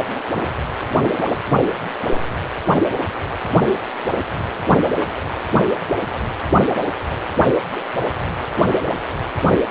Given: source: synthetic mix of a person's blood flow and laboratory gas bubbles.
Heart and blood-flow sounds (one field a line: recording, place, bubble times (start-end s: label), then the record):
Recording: Doppler ultrasound of blood flow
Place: precordium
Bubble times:
no bubbles
From the record:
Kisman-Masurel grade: 000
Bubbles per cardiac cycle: 0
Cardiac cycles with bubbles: 0%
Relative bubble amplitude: no bubbles discernible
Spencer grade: 0 (complete lack of bubble signals)